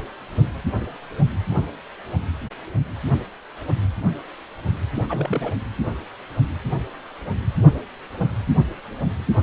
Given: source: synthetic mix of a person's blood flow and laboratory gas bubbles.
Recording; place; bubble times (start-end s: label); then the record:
Doppler ultrasound of blood flow; precordium
4.93-5.04 s: bubbles
5.09-5.55 s: bubbles
From the record:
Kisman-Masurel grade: 221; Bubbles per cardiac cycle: several, 3 to 8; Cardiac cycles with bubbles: 10 to 50%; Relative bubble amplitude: barely perceptible (0.100 to 0.250); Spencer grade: 2 (many but less than half of the cardiac periods contain bubble signals, singularly or in groups); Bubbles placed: anywhere in the cardiac cycle